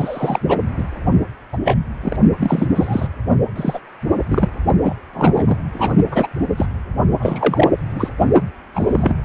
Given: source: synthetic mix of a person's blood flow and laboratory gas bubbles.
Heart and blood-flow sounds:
Doppler ultrasound of blood flow; precordium
0.00-0.40 s: bubbles
0.48-0.59 s: bubbles
0.77-0.83 s: bubbles
1.52-1.57 s: bubbles
1.65-1.76 s: bubbles
2.02-2.17 s: bubbles
2.40-2.67 s: bubbles
2.74-3.08 s: bubbles
3.55-3.79 s: bubbles
4.29-4.49 s: bubbles
4.83-4.96 s: bubbles
5.14-5.56 s: bubbles
5.73-5.93 s: bubbles
6.11-6.27 s: bubbles
6.57-6.66 s: bubbles
7.19-7.71 s: bubbles
7.95-8.09 s: bubbles
8.74-9.18 s: bubbles
9.23-9.25 s: bubbles
From the record:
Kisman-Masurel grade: 233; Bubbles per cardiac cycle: several, 3 to 8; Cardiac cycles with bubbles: 50 to 99%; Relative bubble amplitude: loud (0.450 to 0.775); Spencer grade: 3 (all of the cardiac periods contain showers or single bubble signals, but not dominating or overriding the cardiac motion signals); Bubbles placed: only in the low amplitude regions of the cardiac cycle

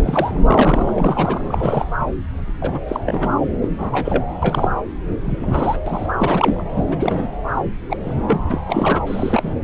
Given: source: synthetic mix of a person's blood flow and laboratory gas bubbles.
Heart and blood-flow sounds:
Doppler ultrasound of blood flow; subclavian vein
0.00-0.40 s: bubbles
0.47-0.93 s: bubbles
0.95-1.42 s: bubbles
1.47-1.88 s: bubbles
2.46-2.80 s: bubbles
2.88-3.00 s: bubbles
3.06-3.32 s: bubbles
3.61-3.69 s: bubbles
3.77-4.25 s: bubbles
4.42-4.68 s: bubbles
5.21-5.79 s: bubbles
5.86-6.08 s: bubbles
6.19-6.62 s: bubbles
6.75-6.83 s: bubbles
6.91-7.28 s: bubbles
7.89-7.96 s: bubbles
8.03-8.13 s: bubbles
8.28-8.38 s: bubbles
8.50-8.61 s: bubbles
8.66-9.02 s: bubbles
9.06-9.54 s: bubbles
From the record:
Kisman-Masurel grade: 242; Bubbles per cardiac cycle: several, 3 to 8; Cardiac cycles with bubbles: 100%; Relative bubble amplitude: moderate (0.250 to 0.450); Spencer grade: 3 (all of the cardiac periods contain showers or single bubble signals, but not dominating or overriding the cardiac motion signals); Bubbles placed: anywhere in the cardiac cycle

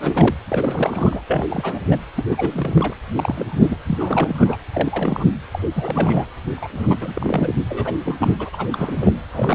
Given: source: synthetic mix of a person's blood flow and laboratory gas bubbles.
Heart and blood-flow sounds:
Doppler ultrasound of blood flow; precordium
0.00-0.34 s: bubbles
0.48-1.22 s: bubbles
1.27-1.47 s: bubbles
1.49-1.84 s: bubbles
1.90-1.98 s: bubbles
2.16-2.25 s: bubbles
2.29-2.94 s: bubbles
3.15-3.77 s: bubbles
3.86-4.56 s: bubbles
4.72-5.36 s: bubbles
5.52-5.60 s: bubbles
5.74-6.26 s: bubbles
6.56-6.69 s: bubbles
6.73-6.96 s: bubbles
7.01-7.54 s: bubbles
7.71-7.96 s: bubbles
8.05-8.16 s: bubbles
8.19-8.36 s: bubbles
8.39-8.49 s: bubbles
8.53-8.67 s: bubbles
8.72-9.12 s: bubbles
9.33-9.55 s: bubbles
From the record:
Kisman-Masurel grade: 342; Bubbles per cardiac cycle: rolling drumbeat, 9 or more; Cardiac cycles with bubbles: 100%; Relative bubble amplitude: moderate (0.250 to 0.450); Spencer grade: 3 (all of the cardiac periods contain showers or single bubble signals, but not dominating or overriding the cardiac motion signals); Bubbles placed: anywhere in the cardiac cycle

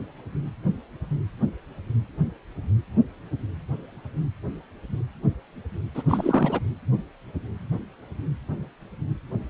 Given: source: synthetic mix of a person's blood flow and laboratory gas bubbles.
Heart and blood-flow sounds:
Doppler ultrasound of blood flow; precordium
5.94-6.02 s: bubbles
6.08-6.59 s: bubbles
From the record:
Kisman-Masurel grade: 212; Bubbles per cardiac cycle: several, 3 to 8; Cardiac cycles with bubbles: 1 to 10%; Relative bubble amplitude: moderate (0.250 to 0.450); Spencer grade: 1 (occasional bubble signal discernible with the cardiac motion signal, with majority of cardiac periods free of bubbles); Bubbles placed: anywhere in the cardiac cycle

